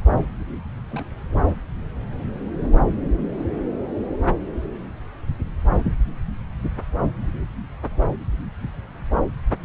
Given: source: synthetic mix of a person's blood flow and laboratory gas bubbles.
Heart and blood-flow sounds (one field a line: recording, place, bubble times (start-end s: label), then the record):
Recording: Doppler ultrasound of blood flow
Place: subclavian vein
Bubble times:
0.88-1.03 s: bubbles
1.31-1.42 s: bubbles
1.46-1.55 s: bubbles
From the record:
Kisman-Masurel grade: 211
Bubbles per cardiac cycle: several, 3 to 8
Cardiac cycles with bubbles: 1 to 10%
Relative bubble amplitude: barely perceptible (0.100 to 0.250)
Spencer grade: 1 (occasional bubble signal discernible with the cardiac motion signal, with majority of cardiac periods free of bubbles)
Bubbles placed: anywhere in the cardiac cycle